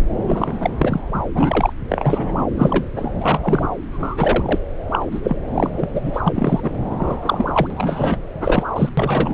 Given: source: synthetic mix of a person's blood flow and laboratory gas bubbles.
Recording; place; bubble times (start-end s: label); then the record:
Doppler ultrasound of blood flow; subclavian vein
0.27-0.67 s: bubbles
0.78-1.01 s: bubbles
1.14-1.21 s: bubbles
1.35-1.73 s: bubbles
1.89-2.32 s: bubbles
2.38-2.46 s: bubbles
2.56-2.84 s: bubbles
2.96-3.12 s: bubbles
3.21-3.73 s: bubbles
3.90-4.59 s: bubbles
4.91-5.21 s: bubbles
5.23-5.36 s: bubbles
5.54-5.90 s: bubbles
5.93-6.21 s: bubbles
6.27-6.72 s: bubbles
6.91-7.67 s: bubbles
7.70-8.17 s: bubbles
8.40-8.65 s: bubbles
8.75-8.89 s: bubbles
8.97-9.34 s: bubbles
From the record:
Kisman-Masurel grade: 233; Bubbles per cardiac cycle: several, 3 to 8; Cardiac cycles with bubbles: 50 to 99%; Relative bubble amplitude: loud (0.450 to 0.775); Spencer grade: 3 (all of the cardiac periods contain showers or single bubble signals, but not dominating or overriding the cardiac motion signals); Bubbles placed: anywhere in the cardiac cycle